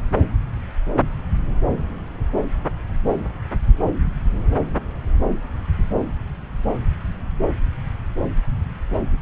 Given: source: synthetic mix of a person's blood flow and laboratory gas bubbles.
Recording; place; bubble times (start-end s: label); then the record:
Doppler ultrasound of blood flow; subclavian vein
no bubbles
From the record:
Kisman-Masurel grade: 000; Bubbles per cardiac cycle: 0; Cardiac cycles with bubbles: 0%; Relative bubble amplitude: no bubbles discernible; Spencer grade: 0 (complete lack of bubble signals)